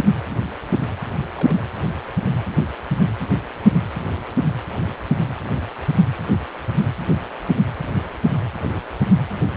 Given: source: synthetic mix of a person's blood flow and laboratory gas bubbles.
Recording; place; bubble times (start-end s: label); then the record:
Doppler ultrasound of blood flow; precordium
1.36-1.62 s: bubbles
From the record:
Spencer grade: 2 (many but less than half of the cardiac periods contain bubble signals, singularly or in groups); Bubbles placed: anywhere in the cardiac cycle